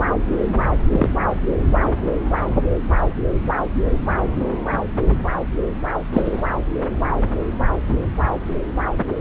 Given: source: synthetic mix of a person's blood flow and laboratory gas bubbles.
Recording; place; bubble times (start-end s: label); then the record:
Doppler ultrasound of blood flow; subclavian vein
0.91-1.09 s: bubbles
6.12-6.43 s: bubbles
From the record:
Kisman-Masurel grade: 122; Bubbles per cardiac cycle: 1 to 2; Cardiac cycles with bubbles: 10 to 50%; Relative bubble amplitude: moderate (0.250 to 0.450); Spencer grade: 2 (many but less than half of the cardiac periods contain bubble signals, singularly or in groups); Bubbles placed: anywhere in the cardiac cycle